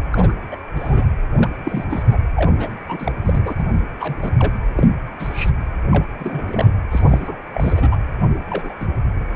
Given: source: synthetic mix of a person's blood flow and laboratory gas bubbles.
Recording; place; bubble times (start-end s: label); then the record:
Doppler ultrasound of blood flow; precordium
0.10-0.32 s: bubbles
0.51-0.56 s: bubbles
0.76-1.04 s: bubbles
1.33-1.49 s: bubbles
1.65-1.84 s: bubbles
1.90-2.17 s: bubbles
2.35-2.52 s: bubbles
2.57-2.82 s: bubbles
2.88-3.12 s: bubbles
3.25-3.52 s: bubbles
3.57-3.80 s: bubbles
4.00-4.31 s: bubbles
4.39-4.53 s: bubbles
4.76-4.89 s: bubbles
5.19-5.51 s: bubbles
5.92-6.05 s: bubbles
6.18-6.72 s: bubbles
6.91-7.37 s: bubbles
7.54-7.96 s: bubbles
8.20-8.30 s: bubbles
8.33-8.43 s: bubbles
8.49-8.74 s: bubbles
8.79-8.87 s: bubbles
9.31-9.36 s: bubbles
From the record:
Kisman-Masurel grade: 242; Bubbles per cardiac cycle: several, 3 to 8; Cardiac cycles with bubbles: 100%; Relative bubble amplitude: moderate (0.250 to 0.450); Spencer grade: 3 (all of the cardiac periods contain showers or single bubble signals, but not dominating or overriding the cardiac motion signals); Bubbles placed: anywhere in the cardiac cycle